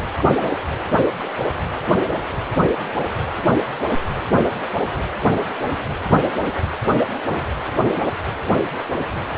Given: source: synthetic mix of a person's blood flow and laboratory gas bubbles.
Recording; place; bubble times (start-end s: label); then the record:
Doppler ultrasound of blood flow; precordium
0.17-0.30 s: bubbles
0.41-0.51 s: bubbles
From the record:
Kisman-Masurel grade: 212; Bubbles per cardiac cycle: several, 3 to 8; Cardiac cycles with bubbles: 1 to 10%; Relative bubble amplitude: moderate (0.250 to 0.450); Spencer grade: 1 (occasional bubble signal discernible with the cardiac motion signal, with majority of cardiac periods free of bubbles); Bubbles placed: anywhere in the cardiac cycle